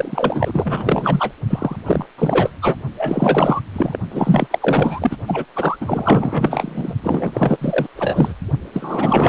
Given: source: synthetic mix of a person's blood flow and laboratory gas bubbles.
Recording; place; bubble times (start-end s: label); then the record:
Doppler ultrasound of blood flow; precordium
0.00-1.32 s: bubbles
1.49-1.76 s: bubbles
1.85-2.06 s: bubbles
2.18-2.50 s: bubbles
2.62-2.77 s: bubbles
2.97-3.61 s: bubbles
3.73-3.97 s: bubbles
4.11-4.47 s: bubbles
4.50-5.17 s: bubbles
5.27-5.45 s: bubbles
5.55-5.77 s: bubbles
5.80-6.94 s: bubbles
7.03-7.88 s: bubbles
7.96-8.34 s: bubbles
8.73-9.29 s: bubbles
From the record:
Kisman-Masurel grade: 444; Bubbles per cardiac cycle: continuous sound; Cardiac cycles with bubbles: 100%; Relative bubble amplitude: maximal (0.775 to 0.999); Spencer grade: 4 (maximum detectable bubble signal sounding continuously throughout systole and diastole of every cardiac period, and overriding the amplitude of the normal cardiac signals); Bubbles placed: only in the low amplitude regions of the cardiac cycle